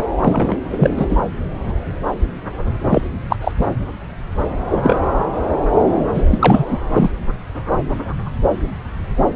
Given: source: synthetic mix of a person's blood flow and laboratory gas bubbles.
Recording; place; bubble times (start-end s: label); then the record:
Doppler ultrasound of blood flow; subclavian vein
0.22-0.57 s: bubbles
0.71-1.17 s: bubbles
2.86-3.02 s: bubbles
3.29-3.36 s: bubbles
3.41-3.52 s: bubbles
4.70-5.04 s: bubbles
6.14-6.24 s: bubbles
6.31-6.64 s: bubbles
6.69-6.79 s: bubbles
6.93-7.12 s: bubbles
From the record:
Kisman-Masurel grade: 223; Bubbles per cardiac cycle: several, 3 to 8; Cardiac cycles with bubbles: 10 to 50%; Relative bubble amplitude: loud (0.450 to 0.775); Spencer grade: 2 (many but less than half of the cardiac periods contain bubble signals, singularly or in groups); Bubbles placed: anywhere in the cardiac cycle